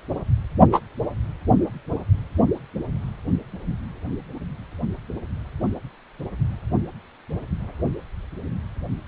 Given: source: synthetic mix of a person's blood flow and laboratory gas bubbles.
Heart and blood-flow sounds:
Doppler ultrasound of blood flow; precordium
0.72-0.80 s: bubbles
From the record:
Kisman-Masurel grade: 113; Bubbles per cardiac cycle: 1 to 2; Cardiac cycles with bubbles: 1 to 10%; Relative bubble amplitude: loud (0.450 to 0.775); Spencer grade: 1 (occasional bubble signal discernible with the cardiac motion signal, with majority of cardiac periods free of bubbles); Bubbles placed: only in the low amplitude regions of the cardiac cycle

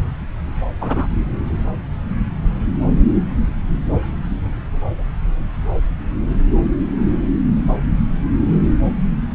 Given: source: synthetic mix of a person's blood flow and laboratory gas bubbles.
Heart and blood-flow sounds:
Doppler ultrasound of blood flow; subclavian vein
0.80-1.07 s: bubbles
From the record:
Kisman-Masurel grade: 113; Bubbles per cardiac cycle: 1 to 2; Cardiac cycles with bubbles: 1 to 10%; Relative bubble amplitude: loud (0.450 to 0.775); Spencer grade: 1 (occasional bubble signal discernible with the cardiac motion signal, with majority of cardiac periods free of bubbles); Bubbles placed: anywhere in the cardiac cycle

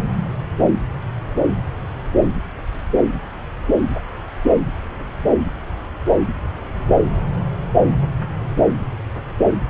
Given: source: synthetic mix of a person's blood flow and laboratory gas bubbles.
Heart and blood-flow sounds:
Doppler ultrasound of blood flow; subclavian vein
no bubbles
From the record:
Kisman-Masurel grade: 000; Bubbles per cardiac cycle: 0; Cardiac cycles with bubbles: 0%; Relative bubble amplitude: no bubbles discernible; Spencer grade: 0 (complete lack of bubble signals)

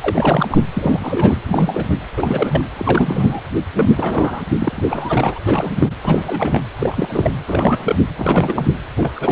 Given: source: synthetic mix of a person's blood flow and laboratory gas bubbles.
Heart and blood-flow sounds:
Doppler ultrasound of blood flow; precordium
0.01-0.63 s: bubbles
0.74-1.40 s: bubbles
1.46-1.98 s: bubbles
2.17-2.61 s: bubbles
2.75-3.41 s: bubbles
3.75-4.42 s: bubbles
4.58-5.42 s: bubbles
5.47-5.71 s: bubbles
5.75-5.93 s: bubbles
6.04-6.63 s: bubbles
6.78-7.33 s: bubbles
7.47-7.95 s: bubbles
8.16-8.74 s: bubbles
8.97-9.11 s: bubbles
9.16-9.32 s: bubbles
From the record:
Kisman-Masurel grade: 342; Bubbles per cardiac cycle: rolling drumbeat, 9 or more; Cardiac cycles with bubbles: 100%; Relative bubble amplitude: moderate (0.250 to 0.450); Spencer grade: 3 (all of the cardiac periods contain showers or single bubble signals, but not dominating or overriding the cardiac motion signals); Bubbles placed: anywhere in the cardiac cycle

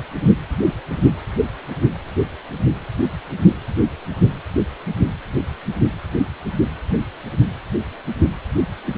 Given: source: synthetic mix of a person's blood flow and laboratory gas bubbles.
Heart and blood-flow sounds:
Doppler ultrasound of blood flow; precordium
no bubbles
From the record:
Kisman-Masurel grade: 000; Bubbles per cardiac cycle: 0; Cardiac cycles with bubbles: 0%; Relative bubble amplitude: no bubbles discernible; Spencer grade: 0 (complete lack of bubble signals)

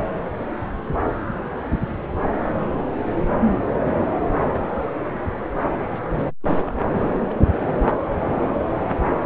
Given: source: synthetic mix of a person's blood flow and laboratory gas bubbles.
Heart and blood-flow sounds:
Doppler ultrasound of blood flow; subclavian vein
5.88-6.34 s: bubbles
6.41-6.74 s: bubbles
6.92-7.07 s: bubbles
7.21-7.35 s: bubbles
7.42-7.46 s: bubbles
From the record:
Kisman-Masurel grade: 221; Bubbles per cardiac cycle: several, 3 to 8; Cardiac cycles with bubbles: 10 to 50%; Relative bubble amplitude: barely perceptible (0.100 to 0.250); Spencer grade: 2 (many but less than half of the cardiac periods contain bubble signals, singularly or in groups); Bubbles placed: anywhere in the cardiac cycle

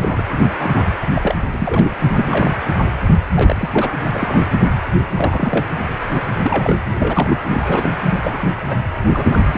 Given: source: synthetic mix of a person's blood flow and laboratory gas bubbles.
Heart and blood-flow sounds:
Doppler ultrasound of blood flow; precordium
0.00-0.24 s: bubbles
0.28-0.36 s: bubbles
0.58-0.85 s: bubbles
1.14-1.35 s: bubbles
1.54-1.94 s: bubbles
2.06-2.10 s: bubbles
2.16-2.51 s: bubbles
3.34-3.69 s: bubbles
3.73-3.92 s: bubbles
4.09-4.43 s: bubbles
5.17-5.66 s: bubbles
6.42-6.75 s: bubbles
7.00-7.38 s: bubbles
7.49-7.91 s: bubbles
8.19-8.52 s: bubbles
8.68-8.76 s: bubbles
9.08-9.39 s: bubbles
9.53-9.58 s: bubbles
From the record:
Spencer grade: 3 (all of the cardiac periods contain showers or single bubble signals, but not dominating or overriding the cardiac motion signals); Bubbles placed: anywhere in the cardiac cycle

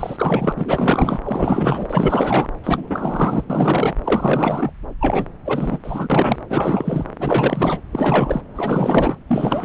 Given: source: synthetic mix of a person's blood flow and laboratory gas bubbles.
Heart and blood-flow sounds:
Doppler ultrasound of blood flow; subclavian vein
0.00-0.52 s: bubbles
0.56-1.20 s: bubbles
1.23-2.47 s: bubbles
2.64-3.45 s: bubbles
3.50-3.95 s: bubbles
4.04-4.73 s: bubbles
5.00-5.25 s: bubbles
5.45-5.79 s: bubbles
5.83-6.38 s: bubbles
6.49-7.06 s: bubbles
7.19-7.81 s: bubbles
7.92-8.41 s: bubbles
8.55-9.17 s: bubbles
9.27-9.65 s: bubbles
From the record:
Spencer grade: 4 (maximum detectable bubble signal sounding continuously throughout systole and diastole of every cardiac period, and overriding the amplitude of the normal cardiac signals); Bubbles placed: anywhere in the cardiac cycle

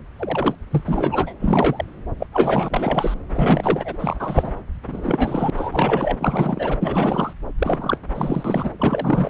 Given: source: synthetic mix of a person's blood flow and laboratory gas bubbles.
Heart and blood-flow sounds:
Doppler ultrasound of blood flow; subclavian vein
0.18-0.55 s: bubbles
0.70-1.34 s: bubbles
1.40-1.85 s: bubbles
2.19-2.27 s: bubbles
2.33-3.14 s: bubbles
3.33-4.52 s: bubbles
4.83-5.50 s: bubbles
5.56-6.78 s: bubbles
6.81-7.33 s: bubbles
7.58-7.97 s: bubbles
8.14-8.69 s: bubbles
8.76-9.30 s: bubbles
From the record:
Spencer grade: 3 (all of the cardiac periods contain showers or single bubble signals, but not dominating or overriding the cardiac motion signals); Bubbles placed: anywhere in the cardiac cycle

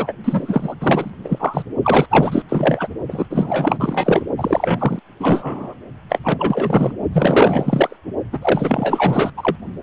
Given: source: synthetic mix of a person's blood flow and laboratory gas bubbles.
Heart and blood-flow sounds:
Doppler ultrasound of blood flow; precordium
0.00-0.13 s: bubbles
0.24-0.74 s: bubbles
0.81-1.10 s: bubbles
1.24-1.63 s: bubbles
1.83-2.06 s: bubbles
2.10-2.42 s: bubbles
2.48-2.88 s: bubbles
3.08-4.22 s: bubbles
4.38-5.00 s: bubbles
5.20-5.74 s: bubbles
6.09-6.18 s: bubbles
6.24-6.92 s: bubbles
7.12-7.97 s: bubbles
8.32-8.39 s: bubbles
8.42-9.30 s: bubbles
9.37-9.56 s: bubbles
From the record:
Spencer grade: 4 (maximum detectable bubble signal sounding continuously throughout systole and diastole of every cardiac period, and overriding the amplitude of the normal cardiac signals); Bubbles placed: only in the low amplitude regions of the cardiac cycle

